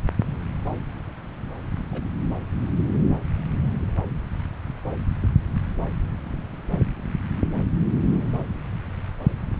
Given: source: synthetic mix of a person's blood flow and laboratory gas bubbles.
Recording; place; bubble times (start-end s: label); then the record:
Doppler ultrasound of blood flow; subclavian vein
1.75-1.83 s: bubbles
1.91-2.03 s: bubbles
From the record:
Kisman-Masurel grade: 111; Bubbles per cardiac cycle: 1 to 2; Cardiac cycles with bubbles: 1 to 10%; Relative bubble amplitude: barely perceptible (0.100 to 0.250); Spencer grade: 1 (occasional bubble signal discernible with the cardiac motion signal, with majority of cardiac periods free of bubbles); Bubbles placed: anywhere in the cardiac cycle